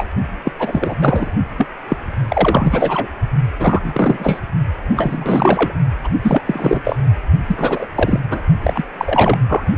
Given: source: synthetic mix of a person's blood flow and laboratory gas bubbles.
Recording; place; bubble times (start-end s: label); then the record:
Doppler ultrasound of blood flow; precordium
0.00-0.06 s: bubbles
0.45-0.52 s: bubbles
0.59-0.96 s: bubbles
1.01-1.30 s: bubbles
1.58-1.67 s: bubbles
1.88-1.96 s: bubbles
2.29-3.08 s: bubbles
3.59-4.39 s: bubbles
4.96-5.72 s: bubbles
6.04-6.09 s: bubbles
6.21-6.42 s: bubbles
6.46-6.80 s: bubbles
6.84-6.96 s: bubbles
7.46-7.86 s: bubbles
7.96-8.20 s: bubbles
8.29-8.42 s: bubbles
8.63-8.84 s: bubbles
8.97-9.38 s: bubbles
9.48-9.65 s: bubbles
From the record:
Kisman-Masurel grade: 343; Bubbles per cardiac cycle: rolling drumbeat, 9 or more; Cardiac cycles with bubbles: 100%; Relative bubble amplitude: loud (0.450 to 0.775); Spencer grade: 3 (all of the cardiac periods contain showers or single bubble signals, but not dominating or overriding the cardiac motion signals); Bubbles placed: only in the low amplitude regions of the cardiac cycle